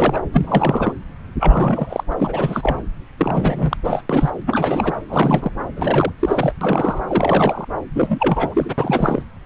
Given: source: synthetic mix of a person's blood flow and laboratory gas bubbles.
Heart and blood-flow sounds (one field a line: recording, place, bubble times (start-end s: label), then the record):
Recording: Doppler ultrasound of blood flow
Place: subclavian vein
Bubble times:
0.00-0.20 s: bubbles
0.31-0.92 s: bubbles
1.40-2.04 s: bubbles
2.11-2.13 s: bubbles
2.19-2.77 s: bubbles
3.19-3.77 s: bubbles
3.84-4.02 s: bubbles
4.09-4.31 s: bubbles
4.46-4.92 s: bubbles
5.08-5.51 s: bubbles
5.75-6.12 s: bubbles
6.20-6.53 s: bubbles
6.61-7.03 s: bubbles
7.08-7.65 s: bubbles
7.94-8.74 s: bubbles
8.78-9.24 s: bubbles
From the record:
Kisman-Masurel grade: 342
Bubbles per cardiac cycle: rolling drumbeat, 9 or more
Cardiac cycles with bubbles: 100%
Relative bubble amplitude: moderate (0.250 to 0.450)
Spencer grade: 3 (all of the cardiac periods contain showers or single bubble signals, but not dominating or overriding the cardiac motion signals)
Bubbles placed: anywhere in the cardiac cycle